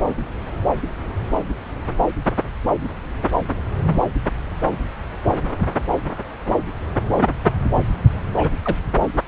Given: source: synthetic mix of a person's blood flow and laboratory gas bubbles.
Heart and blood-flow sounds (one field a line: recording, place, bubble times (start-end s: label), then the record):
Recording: Doppler ultrasound of blood flow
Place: subclavian vein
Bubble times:
8.37-8.50 s: bubbles
8.62-8.76 s: bubbles
From the record:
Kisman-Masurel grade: 212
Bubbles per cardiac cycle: several, 3 to 8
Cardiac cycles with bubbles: 1 to 10%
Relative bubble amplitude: moderate (0.250 to 0.450)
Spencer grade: 1 (occasional bubble signal discernible with the cardiac motion signal, with majority of cardiac periods free of bubbles)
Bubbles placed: anywhere in the cardiac cycle